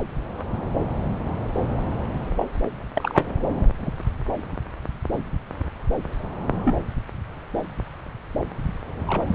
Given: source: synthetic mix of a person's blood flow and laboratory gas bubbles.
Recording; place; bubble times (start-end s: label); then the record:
Doppler ultrasound of blood flow; subclavian vein
2.36-2.44 s: bubbles
2.95-3.24 s: bubbles
3.78-3.91 s: bubbles
6.63-6.75 s: bubbles
9.07-9.22 s: bubbles
From the record:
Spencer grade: 2 (many but less than half of the cardiac periods contain bubble signals, singularly or in groups); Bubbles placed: anywhere in the cardiac cycle